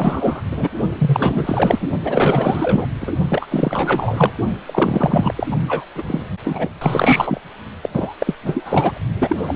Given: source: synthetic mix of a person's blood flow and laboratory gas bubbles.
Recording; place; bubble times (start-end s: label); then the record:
Doppler ultrasound of blood flow; precordium
0.00-0.42 s: bubbles
0.51-0.71 s: bubbles
0.97-1.90 s: bubbles
2.03-2.85 s: bubbles
3.00-3.13 s: bubbles
3.29-3.48 s: bubbles
3.50-4.32 s: bubbles
4.67-5.47 s: bubbles
5.51-5.57 s: bubbles
5.68-5.86 s: bubbles
5.95-6.04 s: bubbles
6.08-6.25 s: bubbles
6.45-6.74 s: bubbles
6.81-7.41 s: bubbles
7.83-7.89 s: bubbles
7.93-8.13 s: bubbles
8.20-8.36 s: bubbles
8.45-8.99 s: bubbles
9.20-9.56 s: bubbles
From the record:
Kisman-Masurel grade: 444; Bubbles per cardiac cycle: continuous sound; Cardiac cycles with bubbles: 100%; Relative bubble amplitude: maximal (0.775 to 0.999); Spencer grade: 4 (maximum detectable bubble signal sounding continuously throughout systole and diastole of every cardiac period, and overriding the amplitude of the normal cardiac signals); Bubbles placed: only in the low amplitude regions of the cardiac cycle